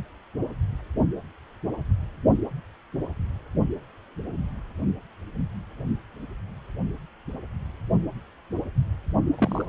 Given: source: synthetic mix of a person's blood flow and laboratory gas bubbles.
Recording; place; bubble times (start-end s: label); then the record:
Doppler ultrasound of blood flow; precordium
9.38-9.65 s: bubbles
From the record:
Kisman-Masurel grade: 112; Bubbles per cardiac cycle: 1 to 2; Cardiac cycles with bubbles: 1 to 10%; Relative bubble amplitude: moderate (0.250 to 0.450); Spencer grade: 1 (occasional bubble signal discernible with the cardiac motion signal, with majority of cardiac periods free of bubbles); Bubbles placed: only in the low amplitude regions of the cardiac cycle